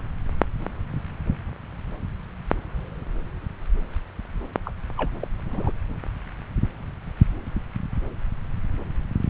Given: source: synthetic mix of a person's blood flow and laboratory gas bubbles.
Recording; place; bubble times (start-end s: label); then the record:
Doppler ultrasound of blood flow; subclavian vein
4.65-4.72 s: bubbles
4.97-5.11 s: bubbles
5.22-5.28 s: bubbles
5.45-5.71 s: bubbles
From the record:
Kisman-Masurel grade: 211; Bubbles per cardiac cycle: several, 3 to 8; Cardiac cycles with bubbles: 1 to 10%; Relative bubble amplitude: barely perceptible (0.100 to 0.250); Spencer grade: 1 (occasional bubble signal discernible with the cardiac motion signal, with majority of cardiac periods free of bubbles); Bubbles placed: anywhere in the cardiac cycle